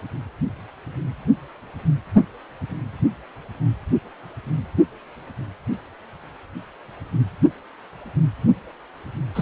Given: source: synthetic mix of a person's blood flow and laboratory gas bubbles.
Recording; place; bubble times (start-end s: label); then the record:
Doppler ultrasound of blood flow; precordium
9.35-9.42 s: bubbles
From the record:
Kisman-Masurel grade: 213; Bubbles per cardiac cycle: several, 3 to 8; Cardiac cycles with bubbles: 1 to 10%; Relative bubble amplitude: loud (0.450 to 0.775); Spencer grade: 1 (occasional bubble signal discernible with the cardiac motion signal, with majority of cardiac periods free of bubbles); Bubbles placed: anywhere in the cardiac cycle